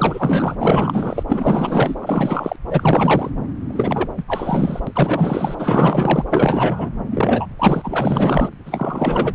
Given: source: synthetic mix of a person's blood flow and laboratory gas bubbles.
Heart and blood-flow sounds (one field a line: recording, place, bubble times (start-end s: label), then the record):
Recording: Doppler ultrasound of blood flow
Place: subclavian vein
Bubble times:
0.00-0.55 s: bubbles
0.58-1.23 s: bubbles
1.28-1.95 s: bubbles
2.00-2.56 s: bubbles
2.69-3.30 s: bubbles
3.68-4.10 s: bubbles
4.17-4.23 s: bubbles
4.28-4.79 s: bubbles
4.87-5.55 s: bubbles
5.58-6.26 s: bubbles
6.32-6.91 s: bubbles
7.12-7.46 s: bubbles
7.58-8.50 s: bubbles
8.66-9.35 s: bubbles
From the record:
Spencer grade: 4 (maximum detectable bubble signal sounding continuously throughout systole and diastole of every cardiac period, and overriding the amplitude of the normal cardiac signals)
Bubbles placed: anywhere in the cardiac cycle